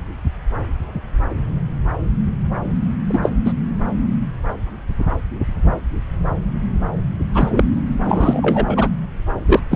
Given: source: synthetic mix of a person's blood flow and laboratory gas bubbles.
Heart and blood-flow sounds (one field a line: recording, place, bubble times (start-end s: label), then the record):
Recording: Doppler ultrasound of blood flow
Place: subclavian vein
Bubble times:
3.08-3.30 s: bubbles
3.45-3.53 s: bubbles
7.33-7.63 s: bubbles
8.04-8.88 s: bubbles
9.47-9.60 s: bubbles
9.71-9.76 s: bubbles
From the record:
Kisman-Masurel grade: 223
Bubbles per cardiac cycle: several, 3 to 8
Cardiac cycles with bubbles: 10 to 50%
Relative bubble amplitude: loud (0.450 to 0.775)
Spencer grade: 2 (many but less than half of the cardiac periods contain bubble signals, singularly or in groups)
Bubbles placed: anywhere in the cardiac cycle